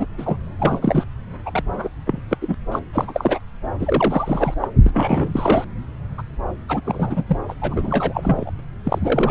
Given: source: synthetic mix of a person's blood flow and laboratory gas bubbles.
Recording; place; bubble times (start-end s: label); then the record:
Doppler ultrasound of blood flow; subclavian vein
0.00-0.07 s: bubbles
0.17-0.36 s: bubbles
0.58-0.79 s: bubbles
0.82-1.05 s: bubbles
1.46-1.64 s: bubbles
1.73-1.89 s: bubbles
2.06-2.22 s: bubbles
2.29-2.37 s: bubbles
2.41-2.54 s: bubbles
2.71-2.79 s: bubbles
2.92-3.39 s: bubbles
3.79-4.54 s: bubbles
4.62-4.67 s: bubbles
4.86-5.65 s: bubbles
6.17-6.23 s: bubbles
6.69-6.81 s: bubbles
6.85-7.23 s: bubbles
7.27-7.38 s: bubbles
7.48-7.54 s: bubbles
7.61-8.52 s: bubbles
8.59-8.63 s: bubbles
8.84-9.31 s: bubbles
From the record:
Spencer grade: 3 (all of the cardiac periods contain showers or single bubble signals, but not dominating or overriding the cardiac motion signals); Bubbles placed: anywhere in the cardiac cycle